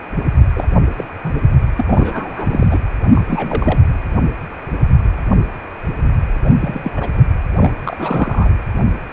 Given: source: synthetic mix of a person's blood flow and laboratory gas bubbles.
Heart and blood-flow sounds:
Doppler ultrasound of blood flow; precordium
0.55-0.66 s: bubbles
0.96-1.04 s: bubbles
1.24-1.40 s: bubbles
1.77-2.67 s: bubbles
2.71-2.79 s: bubbles
3.03-3.09 s: bubbles
3.15-3.23 s: bubbles
3.27-3.79 s: bubbles
6.45-6.92 s: bubbles
6.95-7.24 s: bubbles
7.59-7.72 s: bubbles
7.83-8.51 s: bubbles
From the record:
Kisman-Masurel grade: 222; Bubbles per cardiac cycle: several, 3 to 8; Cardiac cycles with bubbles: 10 to 50%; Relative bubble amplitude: moderate (0.250 to 0.450); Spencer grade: 2 (many but less than half of the cardiac periods contain bubble signals, singularly or in groups); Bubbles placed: anywhere in the cardiac cycle

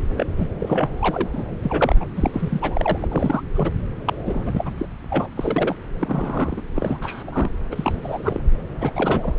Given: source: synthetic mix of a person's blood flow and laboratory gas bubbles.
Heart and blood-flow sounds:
Doppler ultrasound of blood flow; subclavian vein
0.17-0.26 s: bubbles
0.38-0.46 s: bubbles
0.60-0.88 s: bubbles
1.00-1.29 s: bubbles
1.32-1.44 s: bubbles
1.63-1.96 s: bubbles
2.00-2.05 s: bubbles
2.16-3.42 s: bubbles
3.54-3.71 s: bubbles
4.07-4.14 s: bubbles
4.25-4.42 s: bubbles
4.44-4.71 s: bubbles
4.78-4.86 s: bubbles
5.10-5.28 s: bubbles
5.37-5.76 s: bubbles
6.01-6.62 s: bubbles
6.75-7.24 s: bubbles
7.27-7.50 s: bubbles
7.71-8.42 s: bubbles
8.59-8.61 s: bubbles
8.79-8.90 s: bubbles
8.96-9.34 s: bubbles
From the record:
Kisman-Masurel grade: 342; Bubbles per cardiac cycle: rolling drumbeat, 9 or more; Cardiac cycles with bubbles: 100%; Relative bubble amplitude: moderate (0.250 to 0.450); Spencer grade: 3 (all of the cardiac periods contain showers or single bubble signals, but not dominating or overriding the cardiac motion signals); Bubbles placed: anywhere in the cardiac cycle

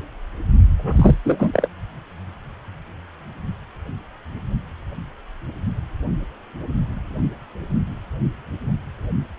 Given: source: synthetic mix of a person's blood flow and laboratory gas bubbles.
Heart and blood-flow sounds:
Doppler ultrasound of blood flow; precordium
0.78-1.16 s: bubbles
1.25-1.68 s: bubbles
From the record:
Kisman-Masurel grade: 213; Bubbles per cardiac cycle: several, 3 to 8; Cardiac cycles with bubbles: 1 to 10%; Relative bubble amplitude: loud (0.450 to 0.775); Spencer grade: 1 (occasional bubble signal discernible with the cardiac motion signal, with majority of cardiac periods free of bubbles); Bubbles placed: only in the low amplitude regions of the cardiac cycle

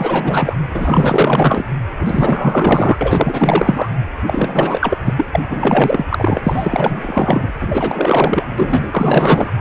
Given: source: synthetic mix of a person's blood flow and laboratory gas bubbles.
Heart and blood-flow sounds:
Doppler ultrasound of blood flow; precordium
0.00-0.55 s: bubbles
0.74-1.64 s: bubbles
1.99-2.98 s: bubbles
3.01-3.89 s: bubbles
4.26-4.98 s: bubbles
5.05-5.27 s: bubbles
5.33-5.40 s: bubbles
5.50-6.41 s: bubbles
6.46-7.52 s: bubbles
7.61-8.44 s: bubbles
8.58-9.52 s: bubbles
From the record:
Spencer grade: 4 (maximum detectable bubble signal sounding continuously throughout systole and diastole of every cardiac period, and overriding the amplitude of the normal cardiac signals); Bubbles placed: anywhere in the cardiac cycle

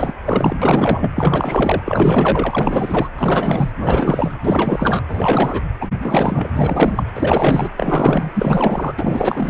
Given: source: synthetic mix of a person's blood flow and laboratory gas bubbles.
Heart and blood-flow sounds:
Doppler ultrasound of blood flow; precordium
0.00-0.14 s: bubbles
0.24-0.56 s: bubbles
0.61-1.09 s: bubbles
1.15-3.09 s: bubbles
3.15-3.72 s: bubbles
3.77-4.36 s: bubbles
4.43-5.02 s: bubbles
5.08-5.62 s: bubbles
5.80-5.88 s: bubbles
6.00-6.52 s: bubbles
6.54-7.03 s: bubbles
7.14-7.70 s: bubbles
7.76-8.93 s: bubbles
8.97-9.50 s: bubbles
From the record:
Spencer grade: 4 (maximum detectable bubble signal sounding continuously throughout systole and diastole of every cardiac period, and overriding the amplitude of the normal cardiac signals); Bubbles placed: anywhere in the cardiac cycle

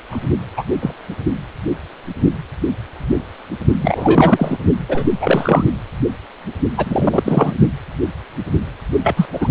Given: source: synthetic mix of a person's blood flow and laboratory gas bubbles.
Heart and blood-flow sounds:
Doppler ultrasound of blood flow; precordium
0.10-0.34 s: bubbles
0.57-0.64 s: bubbles
0.82-0.94 s: bubbles
3.81-4.58 s: bubbles
4.89-5.04 s: bubbles
5.21-5.63 s: bubbles
6.77-7.54 s: bubbles
9.03-9.25 s: bubbles
9.33-9.51 s: bubbles
From the record:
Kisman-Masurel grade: 223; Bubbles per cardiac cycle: several, 3 to 8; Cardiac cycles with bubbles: 10 to 50%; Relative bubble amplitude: loud (0.450 to 0.775); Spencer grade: 2 (many but less than half of the cardiac periods contain bubble signals, singularly or in groups); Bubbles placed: only in the low amplitude regions of the cardiac cycle

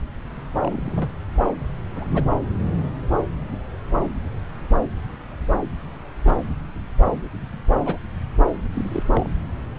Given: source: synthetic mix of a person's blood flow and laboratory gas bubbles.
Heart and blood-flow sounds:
Doppler ultrasound of blood flow; subclavian vein
0.59-1.10 s: bubbles
1.95-2.08 s: bubbles
2.15-2.24 s: bubbles
6.26-6.33 s: bubbles
7.83-7.98 s: bubbles
8.73-9.03 s: bubbles
9.12-9.29 s: bubbles
From the record:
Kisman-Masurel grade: 121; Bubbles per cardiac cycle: 1 to 2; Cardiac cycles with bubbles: 10 to 50%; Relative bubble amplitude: barely perceptible (0.100 to 0.250); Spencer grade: 2 (many but less than half of the cardiac periods contain bubble signals, singularly or in groups); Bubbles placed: anywhere in the cardiac cycle

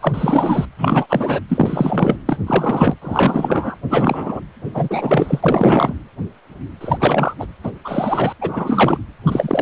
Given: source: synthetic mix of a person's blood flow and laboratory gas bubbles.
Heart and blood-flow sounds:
Doppler ultrasound of blood flow; precordium
0.00-0.65 s: bubbles
0.78-1.06 s: bubbles
1.09-1.40 s: bubbles
1.49-2.17 s: bubbles
2.25-2.38 s: bubbles
2.46-2.95 s: bubbles
3.02-3.76 s: bubbles
3.90-4.40 s: bubbles
4.74-5.93 s: bubbles
6.80-7.34 s: bubbles
7.39-7.46 s: bubbles
7.63-7.71 s: bubbles
7.85-8.33 s: bubbles
8.41-8.97 s: bubbles
9.26-9.62 s: bubbles
From the record:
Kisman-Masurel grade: 333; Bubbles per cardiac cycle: rolling drumbeat, 9 or more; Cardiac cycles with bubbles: 50 to 99%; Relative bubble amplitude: loud (0.450 to 0.775); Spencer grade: 3 (all of the cardiac periods contain showers or single bubble signals, but not dominating or overriding the cardiac motion signals); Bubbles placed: anywhere in the cardiac cycle

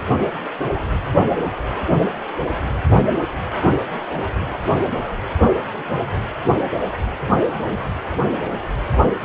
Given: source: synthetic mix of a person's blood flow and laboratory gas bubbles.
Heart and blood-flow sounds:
Doppler ultrasound of blood flow; precordium
no bubbles
From the record:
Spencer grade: 0 (complete lack of bubble signals)

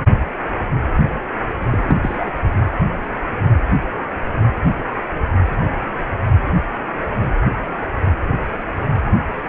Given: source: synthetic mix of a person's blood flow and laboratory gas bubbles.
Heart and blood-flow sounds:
Doppler ultrasound of blood flow; precordium
1.70-1.97 s: bubbles
2.02-2.33 s: bubbles
From the record:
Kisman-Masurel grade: 222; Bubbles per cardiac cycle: several, 3 to 8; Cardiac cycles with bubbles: 10 to 50%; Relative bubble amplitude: moderate (0.250 to 0.450); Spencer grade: 2 (many but less than half of the cardiac periods contain bubble signals, singularly or in groups); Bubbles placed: anywhere in the cardiac cycle

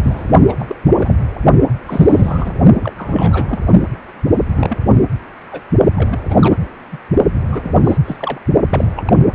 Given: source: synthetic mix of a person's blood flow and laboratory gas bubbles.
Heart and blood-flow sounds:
Doppler ultrasound of blood flow; precordium
0.03-0.33 s: bubbles
0.48-0.54 s: bubbles
0.59-0.75 s: bubbles
0.95-1.20 s: bubbles
1.88-2.52 s: bubbles
2.81-2.93 s: bubbles
2.98-3.59 s: bubbles
3.65-3.83 s: bubbles
4.54-4.77 s: bubbles
5.52-5.62 s: bubbles
5.96-6.19 s: bubbles
6.30-6.57 s: bubbles
6.92-6.98 s: bubbles
7.36-7.98 s: bubbles
8.05-8.39 s: bubbles
8.70-8.94 s: bubbles
8.96-9.13 s: bubbles
From the record:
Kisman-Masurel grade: 242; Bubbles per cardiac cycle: several, 3 to 8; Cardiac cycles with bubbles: 100%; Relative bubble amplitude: moderate (0.250 to 0.450); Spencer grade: 3 (all of the cardiac periods contain showers or single bubble signals, but not dominating or overriding the cardiac motion signals); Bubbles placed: only in the low amplitude regions of the cardiac cycle

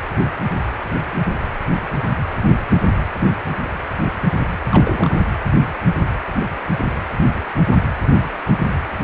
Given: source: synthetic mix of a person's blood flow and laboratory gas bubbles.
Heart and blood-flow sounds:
Doppler ultrasound of blood flow; precordium
4.70-5.25 s: bubbles
From the record:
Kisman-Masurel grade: 211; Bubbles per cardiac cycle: several, 3 to 8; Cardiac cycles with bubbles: 1 to 10%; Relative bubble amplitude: barely perceptible (0.100 to 0.250); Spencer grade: 1 (occasional bubble signal discernible with the cardiac motion signal, with majority of cardiac periods free of bubbles); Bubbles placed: anywhere in the cardiac cycle

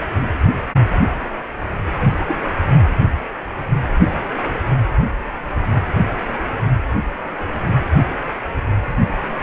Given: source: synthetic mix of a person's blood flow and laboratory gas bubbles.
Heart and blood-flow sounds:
Doppler ultrasound of blood flow; precordium
2.03-2.35 s: bubbles
5.67-5.81 s: bubbles
From the record:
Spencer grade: 2 (many but less than half of the cardiac periods contain bubble signals, singularly or in groups); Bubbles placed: anywhere in the cardiac cycle

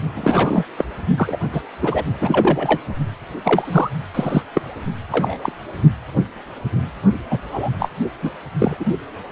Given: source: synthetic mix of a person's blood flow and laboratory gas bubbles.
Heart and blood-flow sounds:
Doppler ultrasound of blood flow; precordium
0.15-0.64 s: bubbles
0.77-0.84 s: bubbles
1.17-1.36 s: bubbles
1.52-1.62 s: bubbles
1.81-2.04 s: bubbles
2.21-2.82 s: bubbles
3.45-3.90 s: bubbles
4.14-4.42 s: bubbles
4.54-4.61 s: bubbles
5.11-5.39 s: bubbles
5.42-5.52 s: bubbles
7.30-7.38 s: bubbles
7.51-7.70 s: bubbles
7.79-7.89 s: bubbles
8.22-8.31 s: bubbles
8.58-8.85 s: bubbles
From the record:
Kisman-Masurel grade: 233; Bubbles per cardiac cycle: several, 3 to 8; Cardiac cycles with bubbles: 50 to 99%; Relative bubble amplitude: loud (0.450 to 0.775); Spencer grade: 3 (all of the cardiac periods contain showers or single bubble signals, but not dominating or overriding the cardiac motion signals); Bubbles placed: only in the low amplitude regions of the cardiac cycle

